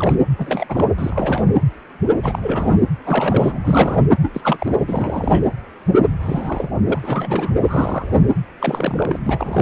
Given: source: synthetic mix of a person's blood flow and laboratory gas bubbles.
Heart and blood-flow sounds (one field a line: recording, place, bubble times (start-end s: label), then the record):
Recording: Doppler ultrasound of blood flow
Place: precordium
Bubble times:
0.00-0.15 s: bubbles
0.38-0.86 s: bubbles
0.97-1.43 s: bubbles
2.23-2.39 s: bubbles
2.42-2.77 s: bubbles
3.04-3.59 s: bubbles
3.63-4.07 s: bubbles
4.22-4.30 s: bubbles
4.33-4.74 s: bubbles
4.87-5.46 s: bubbles
6.20-6.78 s: bubbles
6.86-6.99 s: bubbles
7.03-7.51 s: bubbles
7.62-8.22 s: bubbles
8.61-9.17 s: bubbles
9.24-9.62 s: bubbles
From the record:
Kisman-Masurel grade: 332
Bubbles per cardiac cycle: rolling drumbeat, 9 or more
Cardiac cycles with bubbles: 50 to 99%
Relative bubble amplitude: moderate (0.250 to 0.450)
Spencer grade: 3 (all of the cardiac periods contain showers or single bubble signals, but not dominating or overriding the cardiac motion signals)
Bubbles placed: anywhere in the cardiac cycle